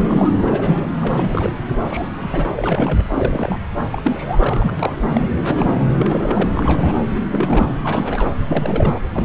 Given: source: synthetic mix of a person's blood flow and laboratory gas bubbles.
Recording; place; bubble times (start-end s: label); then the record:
Doppler ultrasound of blood flow; subclavian vein
0.00-0.30 s: bubbles
0.38-0.86 s: bubbles
1.02-1.52 s: bubbles
1.81-2.51 s: bubbles
2.56-3.08 s: bubbles
3.14-3.59 s: bubbles
3.91-5.04 s: bubbles
5.09-5.28 s: bubbles
5.44-5.89 s: bubbles
5.98-6.50 s: bubbles
6.54-7.00 s: bubbles
7.15-7.20 s: bubbles
7.30-7.78 s: bubbles
7.83-8.30 s: bubbles
8.47-9.00 s: bubbles
9.10-9.25 s: bubbles
From the record:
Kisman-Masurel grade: 342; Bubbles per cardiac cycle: rolling drumbeat, 9 or more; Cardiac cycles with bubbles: 100%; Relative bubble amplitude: moderate (0.250 to 0.450); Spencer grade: 3 (all of the cardiac periods contain showers or single bubble signals, but not dominating or overriding the cardiac motion signals); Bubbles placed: anywhere in the cardiac cycle